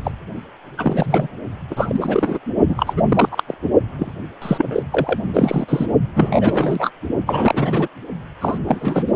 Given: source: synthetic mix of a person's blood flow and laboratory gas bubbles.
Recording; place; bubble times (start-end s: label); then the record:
Doppler ultrasound of blood flow; precordium
0.04-0.12 s: bubbles
0.78-1.28 s: bubbles
1.70-2.40 s: bubbles
2.67-2.94 s: bubbles
2.96-3.01 s: bubbles
3.08-3.44 s: bubbles
3.47-3.54 s: bubbles
3.98-4.10 s: bubbles
4.42-4.83 s: bubbles
4.91-5.19 s: bubbles
5.33-5.86 s: bubbles
6.15-6.90 s: bubbles
7.26-7.88 s: bubbles
8.41-8.58 s: bubbles
8.68-9.04 s: bubbles
9.07-9.12 s: bubbles
From the record:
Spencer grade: 3 (all of the cardiac periods contain showers or single bubble signals, but not dominating or overriding the cardiac motion signals); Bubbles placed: only in the low amplitude regions of the cardiac cycle